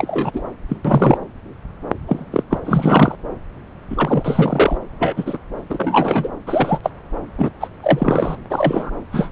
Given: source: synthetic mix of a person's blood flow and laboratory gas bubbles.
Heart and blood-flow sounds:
Doppler ultrasound of blood flow; subclavian vein
0.00-0.43 s: bubbles
0.69-0.76 s: bubbles
0.84-1.18 s: bubbles
2.07-2.25 s: bubbles
2.32-2.43 s: bubbles
2.50-2.58 s: bubbles
2.64-3.16 s: bubbles
3.90-4.78 s: bubbles
4.99-5.38 s: bubbles
5.69-6.29 s: bubbles
6.46-6.79 s: bubbles
6.83-6.89 s: bubbles
7.38-7.50 s: bubbles
7.60-7.68 s: bubbles
7.82-8.37 s: bubbles
8.50-8.90 s: bubbles
9.12-9.29 s: bubbles
From the record:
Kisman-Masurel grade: 243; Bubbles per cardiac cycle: several, 3 to 8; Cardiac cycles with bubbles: 100%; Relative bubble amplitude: loud (0.450 to 0.775); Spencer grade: 3 (all of the cardiac periods contain showers or single bubble signals, but not dominating or overriding the cardiac motion signals); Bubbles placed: anywhere in the cardiac cycle

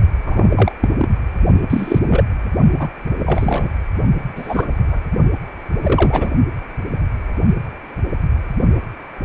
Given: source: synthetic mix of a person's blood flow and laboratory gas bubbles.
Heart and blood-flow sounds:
Doppler ultrasound of blood flow; precordium
0.24-0.72 s: bubbles
0.80-0.89 s: bubbles
0.98-1.09 s: bubbles
1.70-1.99 s: bubbles
2.08-2.23 s: bubbles
2.79-2.88 s: bubbles
3.19-3.68 s: bubbles
4.35-5.00 s: bubbles
5.83-6.30 s: bubbles
From the record:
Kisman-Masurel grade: 233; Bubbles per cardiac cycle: several, 3 to 8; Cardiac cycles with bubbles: 50 to 99%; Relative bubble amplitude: loud (0.450 to 0.775); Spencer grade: 3 (all of the cardiac periods contain showers or single bubble signals, but not dominating or overriding the cardiac motion signals); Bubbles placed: only in the low amplitude regions of the cardiac cycle

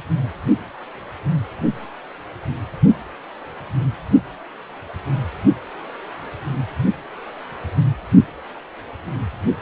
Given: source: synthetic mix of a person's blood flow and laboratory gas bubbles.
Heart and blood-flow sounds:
Doppler ultrasound of blood flow; precordium
9.58-9.61 s: bubbles
From the record:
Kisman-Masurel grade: 112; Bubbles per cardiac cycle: 1 to 2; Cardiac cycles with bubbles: 1 to 10%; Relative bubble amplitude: moderate (0.250 to 0.450); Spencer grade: 1 (occasional bubble signal discernible with the cardiac motion signal, with majority of cardiac periods free of bubbles); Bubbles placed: only in the low amplitude regions of the cardiac cycle

